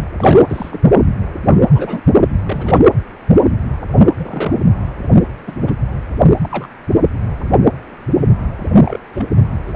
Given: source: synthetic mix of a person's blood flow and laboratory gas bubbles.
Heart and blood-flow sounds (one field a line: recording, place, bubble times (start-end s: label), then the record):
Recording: Doppler ultrasound of blood flow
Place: precordium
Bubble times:
0.00-0.03 s: bubbles
0.18-0.42 s: bubbles
0.49-0.93 s: bubbles
1.73-2.03 s: bubbles
2.46-2.82 s: bubbles
4.16-4.59 s: bubbles
5.46-5.55 s: bubbles
5.62-5.73 s: bubbles
6.17-6.30 s: bubbles
6.41-6.67 s: bubbles
8.76-8.98 s: bubbles
9.13-9.27 s: bubbles
9.66-9.72 s: bubbles
From the record:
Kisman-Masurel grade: 232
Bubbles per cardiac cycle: several, 3 to 8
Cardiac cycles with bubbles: 50 to 99%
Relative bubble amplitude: moderate (0.250 to 0.450)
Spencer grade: 3 (all of the cardiac periods contain showers or single bubble signals, but not dominating or overriding the cardiac motion signals)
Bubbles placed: anywhere in the cardiac cycle